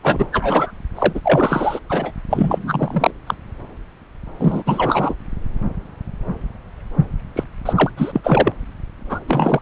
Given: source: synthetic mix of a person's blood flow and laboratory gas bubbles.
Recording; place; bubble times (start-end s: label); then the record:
Doppler ultrasound of blood flow; subclavian vein
0.02-0.28 s: bubbles
0.32-0.71 s: bubbles
0.96-1.20 s: bubbles
1.23-1.79 s: bubbles
1.89-2.12 s: bubbles
2.30-3.11 s: bubbles
3.27-3.34 s: bubbles
4.39-4.63 s: bubbles
4.66-5.14 s: bubbles
7.36-7.43 s: bubbles
7.65-7.90 s: bubbles
7.96-8.21 s: bubbles
8.23-8.52 s: bubbles
9.09-9.20 s: bubbles
9.28-9.61 s: bubbles
From the record:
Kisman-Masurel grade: 333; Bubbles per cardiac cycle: rolling drumbeat, 9 or more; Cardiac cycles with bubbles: 50 to 99%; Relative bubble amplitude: loud (0.450 to 0.775); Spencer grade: 3 (all of the cardiac periods contain showers or single bubble signals, but not dominating or overriding the cardiac motion signals); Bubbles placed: anywhere in the cardiac cycle